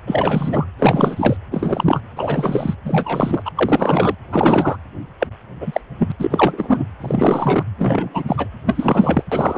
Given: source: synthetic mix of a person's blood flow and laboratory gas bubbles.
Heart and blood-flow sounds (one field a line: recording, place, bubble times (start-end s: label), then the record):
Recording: Doppler ultrasound of blood flow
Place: precordium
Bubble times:
0.07-0.66 s: bubbles
0.78-1.37 s: bubbles
1.51-2.01 s: bubbles
2.16-2.75 s: bubbles
2.85-3.42 s: bubbles
3.45-3.51 s: bubbles
3.57-4.15 s: bubbles
4.31-4.77 s: bubbles
5.20-5.27 s: bubbles
5.61-5.81 s: bubbles
5.99-6.12 s: bubbles
6.19-6.83 s: bubbles
7.00-7.63 s: bubbles
7.77-8.49 s: bubbles
8.65-9.23 s: bubbles
9.31-9.58 s: bubbles
From the record:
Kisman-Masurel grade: 343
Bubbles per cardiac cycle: rolling drumbeat, 9 or more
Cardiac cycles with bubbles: 100%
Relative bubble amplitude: loud (0.450 to 0.775)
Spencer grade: 3 (all of the cardiac periods contain showers or single bubble signals, but not dominating or overriding the cardiac motion signals)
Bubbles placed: anywhere in the cardiac cycle